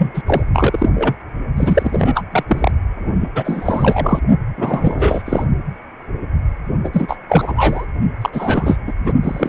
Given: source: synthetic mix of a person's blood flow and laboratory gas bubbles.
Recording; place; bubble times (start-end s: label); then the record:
Doppler ultrasound of blood flow; precordium
0.00-0.22 s: bubbles
0.26-0.43 s: bubbles
0.53-0.90 s: bubbles
0.94-1.15 s: bubbles
1.56-2.21 s: bubbles
2.31-2.44 s: bubbles
2.48-2.71 s: bubbles
2.96-3.28 s: bubbles
3.35-4.19 s: bubbles
4.57-5.46 s: bubbles
6.84-6.90 s: bubbles
6.93-7.17 s: bubbles
7.29-7.85 s: bubbles
8.21-8.29 s: bubbles
8.32-8.78 s: bubbles
8.87-8.93 s: bubbles
9.04-9.13 s: bubbles
9.22-9.49 s: bubbles
From the record:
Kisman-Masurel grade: 333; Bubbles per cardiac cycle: rolling drumbeat, 9 or more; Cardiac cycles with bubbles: 50 to 99%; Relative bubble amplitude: loud (0.450 to 0.775); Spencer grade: 3 (all of the cardiac periods contain showers or single bubble signals, but not dominating or overriding the cardiac motion signals); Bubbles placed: only in the low amplitude regions of the cardiac cycle